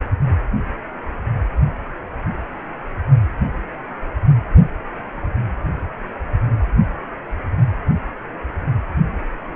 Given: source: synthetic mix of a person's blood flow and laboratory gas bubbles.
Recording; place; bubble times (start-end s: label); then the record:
Doppler ultrasound of blood flow; precordium
no bubbles
From the record:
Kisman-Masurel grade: 000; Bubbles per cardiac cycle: 0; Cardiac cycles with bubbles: 0%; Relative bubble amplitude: no bubbles discernible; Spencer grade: 0 (complete lack of bubble signals)